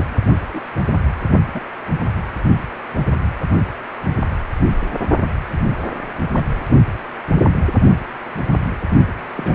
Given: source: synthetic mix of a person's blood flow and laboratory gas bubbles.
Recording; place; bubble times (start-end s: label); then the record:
Doppler ultrasound of blood flow; precordium
0.00-0.08 s: bubbles
0.53-0.60 s: bubbles
1.55-1.60 s: bubbles
6.32-6.42 s: bubbles
9.36-9.55 s: bubbles
From the record:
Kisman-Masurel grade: 122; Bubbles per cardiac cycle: 1 to 2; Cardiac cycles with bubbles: 10 to 50%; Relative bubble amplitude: moderate (0.250 to 0.450); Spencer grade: 2 (many but less than half of the cardiac periods contain bubble signals, singularly or in groups); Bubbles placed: only in the low amplitude regions of the cardiac cycle